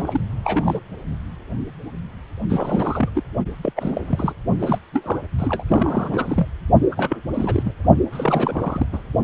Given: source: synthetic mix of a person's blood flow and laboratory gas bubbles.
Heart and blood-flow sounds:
Doppler ultrasound of blood flow; precordium
0.00-0.21 s: bubbles
0.43-0.81 s: bubbles
2.49-3.09 s: bubbles
3.15-3.22 s: bubbles
3.62-3.73 s: bubbles
3.76-4.34 s: bubbles
4.59-4.79 s: bubbles
4.92-5.19 s: bubbles
5.38-5.63 s: bubbles
5.68-6.47 s: bubbles
6.91-7.18 s: bubbles
7.34-7.73 s: bubbles
8.12-8.86 s: bubbles
8.92-9.02 s: bubbles
From the record:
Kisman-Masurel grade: 342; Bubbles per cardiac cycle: rolling drumbeat, 9 or more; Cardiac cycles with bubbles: 100%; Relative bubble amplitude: moderate (0.250 to 0.450); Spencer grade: 3 (all of the cardiac periods contain showers or single bubble signals, but not dominating or overriding the cardiac motion signals); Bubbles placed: only in the low amplitude regions of the cardiac cycle

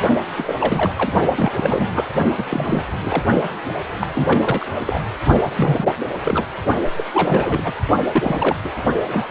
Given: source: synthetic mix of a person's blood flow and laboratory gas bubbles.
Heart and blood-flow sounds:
Doppler ultrasound of blood flow; precordium
0.36-0.55 s: bubbles
0.60-0.92 s: bubbles
0.98-1.09 s: bubbles
1.35-1.52 s: bubbles
1.56-2.07 s: bubbles
2.38-2.43 s: bubbles
2.49-2.82 s: bubbles
3.02-3.22 s: bubbles
4.00-4.07 s: bubbles
4.14-4.42 s: bubbles
4.44-4.64 s: bubbles
4.87-5.00 s: bubbles
5.35-5.92 s: bubbles
6.24-6.48 s: bubbles
6.97-7.04 s: bubbles
7.13-7.72 s: bubbles
8.12-8.57 s: bubbles
8.62-8.71 s: bubbles
9.08-9.31 s: bubbles
From the record:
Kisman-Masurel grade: 332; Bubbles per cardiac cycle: rolling drumbeat, 9 or more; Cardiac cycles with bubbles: 50 to 99%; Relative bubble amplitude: moderate (0.250 to 0.450); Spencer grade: 3 (all of the cardiac periods contain showers or single bubble signals, but not dominating or overriding the cardiac motion signals); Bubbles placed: only in the low amplitude regions of the cardiac cycle

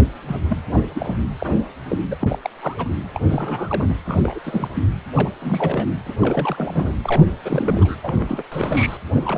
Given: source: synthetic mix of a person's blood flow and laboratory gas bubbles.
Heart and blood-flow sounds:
Doppler ultrasound of blood flow; precordium
0.27-0.37 s: bubbles
0.48-0.57 s: bubbles
0.73-0.85 s: bubbles
0.93-1.17 s: bubbles
1.40-1.56 s: bubbles
1.85-2.04 s: bubbles
2.10-2.15 s: bubbles
2.21-2.38 s: bubbles
2.42-2.50 s: bubbles
2.61-2.90 s: bubbles
3.13-3.22 s: bubbles
3.26-3.97 s: bubbles
4.06-4.39 s: bubbles
4.44-4.68 s: bubbles
4.75-4.84 s: bubbles
5.14-5.30 s: bubbles
5.42-5.87 s: bubbles
6.05-6.14 s: bubbles
6.20-6.92 s: bubbles
7.04-7.24 s: bubbles
7.43-7.95 s: bubbles
8.03-8.43 s: bubbles
8.52-8.97 s: bubbles
9.14-9.38 s: bubbles
From the record:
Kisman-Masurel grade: 342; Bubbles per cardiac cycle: rolling drumbeat, 9 or more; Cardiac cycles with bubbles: 100%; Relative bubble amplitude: moderate (0.250 to 0.450); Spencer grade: 3 (all of the cardiac periods contain showers or single bubble signals, but not dominating or overriding the cardiac motion signals); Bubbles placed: anywhere in the cardiac cycle

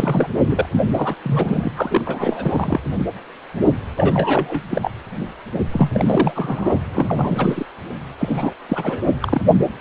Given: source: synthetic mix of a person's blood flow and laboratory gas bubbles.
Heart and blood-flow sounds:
Doppler ultrasound of blood flow; precordium
0.00-0.28 s: bubbles
0.46-0.68 s: bubbles
0.72-0.80 s: bubbles
0.93-1.16 s: bubbles
1.23-1.71 s: bubbles
1.76-2.02 s: bubbles
2.06-2.80 s: bubbles
3.97-4.63 s: bubbles
4.70-4.91 s: bubbles
5.54-5.59 s: bubbles
5.72-6.79 s: bubbles
6.93-7.65 s: bubbles
8.19-8.53 s: bubbles
8.69-9.04 s: bubbles
9.20-9.41 s: bubbles
From the record:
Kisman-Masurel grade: 332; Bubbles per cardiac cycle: rolling drumbeat, 9 or more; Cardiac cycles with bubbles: 50 to 99%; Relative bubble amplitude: moderate (0.250 to 0.450); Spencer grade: 3 (all of the cardiac periods contain showers or single bubble signals, but not dominating or overriding the cardiac motion signals); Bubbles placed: anywhere in the cardiac cycle

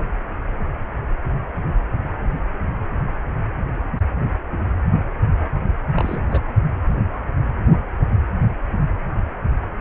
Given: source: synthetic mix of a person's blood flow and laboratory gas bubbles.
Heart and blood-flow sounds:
Doppler ultrasound of blood flow; precordium
5.96-6.23 s: bubbles
6.28-6.43 s: bubbles
From the record:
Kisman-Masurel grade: 211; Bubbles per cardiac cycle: several, 3 to 8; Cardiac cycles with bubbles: 1 to 10%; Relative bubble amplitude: barely perceptible (0.100 to 0.250); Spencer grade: 1 (occasional bubble signal discernible with the cardiac motion signal, with majority of cardiac periods free of bubbles); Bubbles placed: anywhere in the cardiac cycle

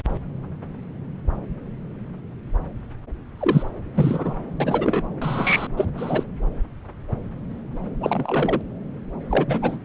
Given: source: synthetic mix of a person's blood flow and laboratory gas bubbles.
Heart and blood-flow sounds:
Doppler ultrasound of blood flow; subclavian vein
3.37-3.71 s: bubbles
3.94-4.36 s: bubbles
4.60-5.02 s: bubbles
5.21-5.67 s: bubbles
5.76-5.86 s: bubbles
5.97-6.24 s: bubbles
8.01-8.61 s: bubbles
9.30-9.78 s: bubbles
From the record:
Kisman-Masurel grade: 222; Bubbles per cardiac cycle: several, 3 to 8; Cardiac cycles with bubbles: 10 to 50%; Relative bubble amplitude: moderate (0.250 to 0.450); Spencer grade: 2 (many but less than half of the cardiac periods contain bubble signals, singularly or in groups); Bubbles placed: anywhere in the cardiac cycle

